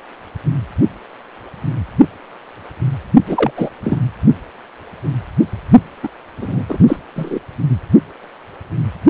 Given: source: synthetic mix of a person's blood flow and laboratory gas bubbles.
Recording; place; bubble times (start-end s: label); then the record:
Doppler ultrasound of blood flow; precordium
3.26-3.51 s: bubbles
3.56-3.69 s: bubbles
3.83-3.99 s: bubbles
6.03-6.08 s: bubbles
6.41-6.63 s: bubbles
6.68-6.79 s: bubbles
6.87-6.98 s: bubbles
7.15-7.40 s: bubbles
From the record:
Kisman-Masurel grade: 223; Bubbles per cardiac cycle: several, 3 to 8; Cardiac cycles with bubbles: 10 to 50%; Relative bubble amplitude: loud (0.450 to 0.775); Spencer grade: 2 (many but less than half of the cardiac periods contain bubble signals, singularly or in groups); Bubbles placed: only in the low amplitude regions of the cardiac cycle